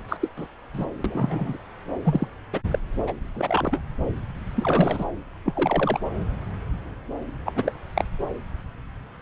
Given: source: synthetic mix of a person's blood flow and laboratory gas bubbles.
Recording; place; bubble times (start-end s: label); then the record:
Doppler ultrasound of blood flow; subclavian vein
0.09-0.17 s: bubbles
0.20-0.28 s: bubbles
0.37-0.48 s: bubbles
0.73-0.85 s: bubbles
1.04-1.57 s: bubbles
2.04-2.27 s: bubbles
2.52-2.60 s: bubbles
2.71-2.79 s: bubbles
3.06-3.13 s: bubbles
3.34-3.82 s: bubbles
4.55-5.05 s: bubbles
5.45-5.99 s: bubbles
7.46-7.53 s: bubbles
7.55-7.72 s: bubbles
7.95-8.05 s: bubbles
From the record:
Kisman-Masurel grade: 232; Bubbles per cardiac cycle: several, 3 to 8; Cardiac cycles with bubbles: 50 to 99%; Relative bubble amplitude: moderate (0.250 to 0.450); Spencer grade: 3 (all of the cardiac periods contain showers or single bubble signals, but not dominating or overriding the cardiac motion signals); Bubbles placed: anywhere in the cardiac cycle